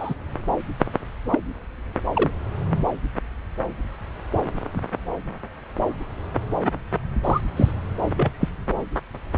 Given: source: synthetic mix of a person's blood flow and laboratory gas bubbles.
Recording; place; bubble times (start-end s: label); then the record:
Doppler ultrasound of blood flow; subclavian vein
0.00-0.14 s: bubbles
1.31-1.39 s: bubbles
2.14-2.31 s: bubbles
7.24-7.41 s: bubbles
7.57-7.71 s: bubbles
8.03-8.31 s: bubbles
8.40-8.48 s: bubbles
From the record:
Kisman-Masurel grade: 122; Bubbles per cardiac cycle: 1 to 2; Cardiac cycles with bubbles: 10 to 50%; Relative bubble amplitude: moderate (0.250 to 0.450); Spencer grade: 2 (many but less than half of the cardiac periods contain bubble signals, singularly or in groups); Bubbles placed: anywhere in the cardiac cycle